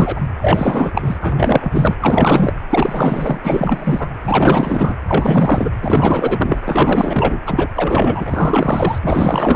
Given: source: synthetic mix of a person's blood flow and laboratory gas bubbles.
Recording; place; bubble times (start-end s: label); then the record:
Doppler ultrasound of blood flow; precordium
0.00-0.21 s: bubbles
0.42-1.16 s: bubbles
1.20-1.95 s: bubbles
2.00-2.54 s: bubbles
2.70-3.39 s: bubbles
3.43-4.08 s: bubbles
4.24-4.97 s: bubbles
5.07-5.71 s: bubbles
5.82-6.60 s: bubbles
6.65-7.41 s: bubbles
7.46-7.68 s: bubbles
7.75-8.99 s: bubbles
9.02-9.56 s: bubbles
From the record:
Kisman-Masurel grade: 444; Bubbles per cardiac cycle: continuous sound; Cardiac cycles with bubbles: 100%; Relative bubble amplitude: maximal (0.775 to 0.999); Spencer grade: 4 (maximum detectable bubble signal sounding continuously throughout systole and diastole of every cardiac period, and overriding the amplitude of the normal cardiac signals); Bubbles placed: anywhere in the cardiac cycle